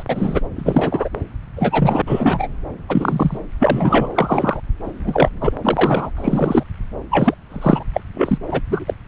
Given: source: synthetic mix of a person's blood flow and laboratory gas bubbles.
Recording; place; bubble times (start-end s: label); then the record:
Doppler ultrasound of blood flow; subclavian vein
0.00-0.03 s: bubbles
0.09-0.41 s: bubbles
0.56-1.08 s: bubbles
1.56-2.02 s: bubbles
2.07-2.49 s: bubbles
2.88-3.38 s: bubbles
3.59-4.08 s: bubbles
4.14-4.60 s: bubbles
4.83-5.29 s: bubbles
5.40-5.53 s: bubbles
5.63-6.10 s: bubbles
6.17-6.63 s: bubbles
7.10-7.34 s: bubbles
7.50-7.83 s: bubbles
7.93-8.01 s: bubbles
8.14-8.38 s: bubbles
8.47-8.61 s: bubbles
8.69-8.94 s: bubbles
From the record:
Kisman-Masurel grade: 243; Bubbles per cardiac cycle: several, 3 to 8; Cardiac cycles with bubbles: 100%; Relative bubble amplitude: loud (0.450 to 0.775); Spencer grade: 3 (all of the cardiac periods contain showers or single bubble signals, but not dominating or overriding the cardiac motion signals); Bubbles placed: anywhere in the cardiac cycle